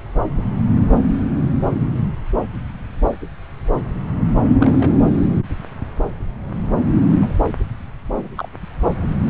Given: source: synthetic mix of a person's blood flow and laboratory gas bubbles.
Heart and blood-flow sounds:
Doppler ultrasound of blood flow; subclavian vein
4.54-4.95 s: bubbles
7.20-7.33 s: bubbles
8.17-8.29 s: bubbles
8.36-8.48 s: bubbles
From the record:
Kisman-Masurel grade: 121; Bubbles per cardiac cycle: 1 to 2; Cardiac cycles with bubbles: 10 to 50%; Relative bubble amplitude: barely perceptible (0.100 to 0.250); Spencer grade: 2 (many but less than half of the cardiac periods contain bubble signals, singularly or in groups); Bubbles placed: anywhere in the cardiac cycle

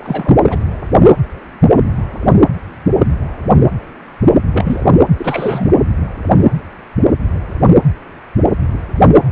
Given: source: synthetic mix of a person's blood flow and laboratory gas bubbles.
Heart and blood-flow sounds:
Doppler ultrasound of blood flow; precordium
0.00-0.35 s: bubbles
0.46-0.57 s: bubbles
4.52-4.92 s: bubbles
5.17-5.71 s: bubbles
From the record:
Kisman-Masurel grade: 222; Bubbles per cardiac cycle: several, 3 to 8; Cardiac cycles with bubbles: 10 to 50%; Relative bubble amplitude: moderate (0.250 to 0.450); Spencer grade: 2 (many but less than half of the cardiac periods contain bubble signals, singularly or in groups); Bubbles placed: anywhere in the cardiac cycle

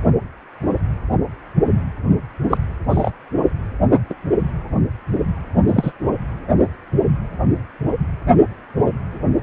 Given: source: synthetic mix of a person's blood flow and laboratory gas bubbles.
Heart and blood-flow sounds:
Doppler ultrasound of blood flow; precordium
2.50-2.58 s: bubbles
2.89-3.10 s: bubbles
4.09-4.14 s: bubbles
5.67-5.92 s: bubbles
6.59-6.65 s: bubbles
From the record:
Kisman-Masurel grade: 123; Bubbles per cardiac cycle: 1 to 2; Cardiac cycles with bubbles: 10 to 50%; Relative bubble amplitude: loud (0.450 to 0.775); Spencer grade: 2 (many but less than half of the cardiac periods contain bubble signals, singularly or in groups); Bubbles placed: anywhere in the cardiac cycle

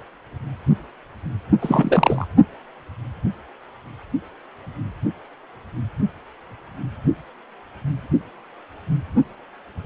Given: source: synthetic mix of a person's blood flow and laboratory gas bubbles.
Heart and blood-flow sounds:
Doppler ultrasound of blood flow; precordium
1.61-2.27 s: bubbles
From the record:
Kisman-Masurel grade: 213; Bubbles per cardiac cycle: several, 3 to 8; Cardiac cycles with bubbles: 1 to 10%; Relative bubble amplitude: loud (0.450 to 0.775); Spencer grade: 1 (occasional bubble signal discernible with the cardiac motion signal, with majority of cardiac periods free of bubbles); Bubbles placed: only in the low amplitude regions of the cardiac cycle

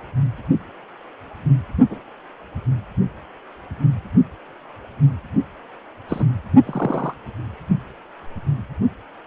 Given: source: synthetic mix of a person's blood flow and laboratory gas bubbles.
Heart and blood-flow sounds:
Doppler ultrasound of blood flow; precordium
1.90-2.00 s: bubbles
6.08-6.25 s: bubbles
6.66-7.14 s: bubbles
From the record:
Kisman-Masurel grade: 122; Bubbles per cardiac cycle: 1 to 2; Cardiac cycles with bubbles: 10 to 50%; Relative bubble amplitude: moderate (0.250 to 0.450); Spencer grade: 2 (many but less than half of the cardiac periods contain bubble signals, singularly or in groups); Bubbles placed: only in the low amplitude regions of the cardiac cycle

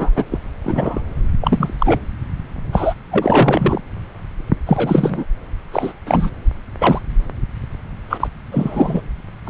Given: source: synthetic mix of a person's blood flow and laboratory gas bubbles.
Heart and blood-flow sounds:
Doppler ultrasound of blood flow; subclavian vein
0.00-0.11 s: bubbles
0.16-0.24 s: bubbles
0.31-0.39 s: bubbles
0.63-1.01 s: bubbles
1.41-1.99 s: bubbles
2.72-2.94 s: bubbles
3.11-3.81 s: bubbles
4.66-5.24 s: bubbles
5.72-5.93 s: bubbles
6.05-6.30 s: bubbles
6.79-7.01 s: bubbles
8.10-8.28 s: bubbles
8.51-9.02 s: bubbles
9.46-9.50 s: bubbles
From the record:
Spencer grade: 3 (all of the cardiac periods contain showers or single bubble signals, but not dominating or overriding the cardiac motion signals); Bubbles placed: anywhere in the cardiac cycle

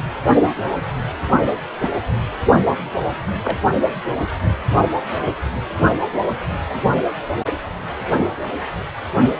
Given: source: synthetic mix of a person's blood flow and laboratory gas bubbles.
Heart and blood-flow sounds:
Doppler ultrasound of blood flow; precordium
1.81-1.90 s: bubbles
2.94-3.00 s: bubbles
3.44-3.57 s: bubbles
From the record:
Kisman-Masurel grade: 122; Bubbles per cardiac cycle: 1 to 2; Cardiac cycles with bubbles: 10 to 50%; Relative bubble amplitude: moderate (0.250 to 0.450); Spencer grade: 2 (many but less than half of the cardiac periods contain bubble signals, singularly or in groups); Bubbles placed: only in the low amplitude regions of the cardiac cycle

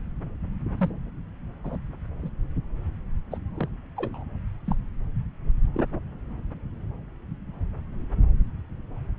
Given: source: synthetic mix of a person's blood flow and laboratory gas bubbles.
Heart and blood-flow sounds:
Doppler ultrasound of blood flow; subclavian vein
0.77-0.90 s: bubbles
1.64-1.78 s: bubbles
2.22-2.30 s: bubbles
3.31-3.38 s: bubbles
3.57-3.68 s: bubbles
3.96-4.25 s: bubbles
4.66-4.75 s: bubbles
5.74-5.86 s: bubbles
From the record:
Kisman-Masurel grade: 121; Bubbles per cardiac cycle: 1 to 2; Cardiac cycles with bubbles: 10 to 50%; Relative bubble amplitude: barely perceptible (0.100 to 0.250); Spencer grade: 2 (many but less than half of the cardiac periods contain bubble signals, singularly or in groups); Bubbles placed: anywhere in the cardiac cycle

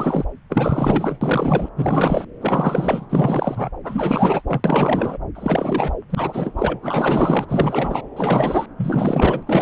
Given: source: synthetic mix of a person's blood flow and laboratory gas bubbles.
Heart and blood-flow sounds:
Doppler ultrasound of blood flow; subclavian vein
0.00-0.24 s: bubbles
0.49-1.19 s: bubbles
1.21-1.69 s: bubbles
1.76-2.25 s: bubbles
2.41-3.05 s: bubbles
3.09-3.70 s: bubbles
3.83-4.42 s: bubbles
4.47-5.18 s: bubbles
5.35-5.92 s: bubbles
6.09-6.79 s: bubbles
6.82-7.46 s: bubbles
7.48-8.02 s: bubbles
8.16-8.66 s: bubbles
8.77-9.43 s: bubbles
9.46-9.62 s: bubbles
From the record:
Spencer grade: 4 (maximum detectable bubble signal sounding continuously throughout systole and diastole of every cardiac period, and overriding the amplitude of the normal cardiac signals); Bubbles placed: anywhere in the cardiac cycle

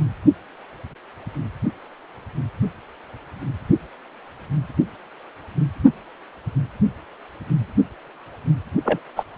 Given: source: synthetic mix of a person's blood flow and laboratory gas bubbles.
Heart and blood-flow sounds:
Doppler ultrasound of blood flow; precordium
8.85-9.00 s: bubbles
9.16-9.25 s: bubbles
From the record:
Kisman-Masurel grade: 112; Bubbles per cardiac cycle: 1 to 2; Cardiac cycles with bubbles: 1 to 10%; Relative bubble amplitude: moderate (0.250 to 0.450); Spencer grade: 1 (occasional bubble signal discernible with the cardiac motion signal, with majority of cardiac periods free of bubbles); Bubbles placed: only in the low amplitude regions of the cardiac cycle

